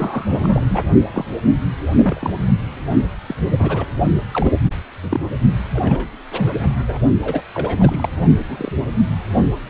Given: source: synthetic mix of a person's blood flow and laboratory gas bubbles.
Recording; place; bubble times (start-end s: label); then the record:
Doppler ultrasound of blood flow; precordium
0.00-0.84 s: bubbles
1.14-1.25 s: bubbles
1.92-2.31 s: bubbles
3.27-3.34 s: bubbles
3.59-3.85 s: bubbles
4.31-4.51 s: bubbles
5.03-5.20 s: bubbles
5.74-6.09 s: bubbles
6.30-6.53 s: bubbles
6.58-6.70 s: bubbles
6.88-6.98 s: bubbles
7.24-7.41 s: bubbles
7.54-8.09 s: bubbles
8.38-8.72 s: bubbles
From the record:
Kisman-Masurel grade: 242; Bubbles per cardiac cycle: several, 3 to 8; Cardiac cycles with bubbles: 100%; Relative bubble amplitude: moderate (0.250 to 0.450); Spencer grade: 3 (all of the cardiac periods contain showers or single bubble signals, but not dominating or overriding the cardiac motion signals); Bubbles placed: only in the low amplitude regions of the cardiac cycle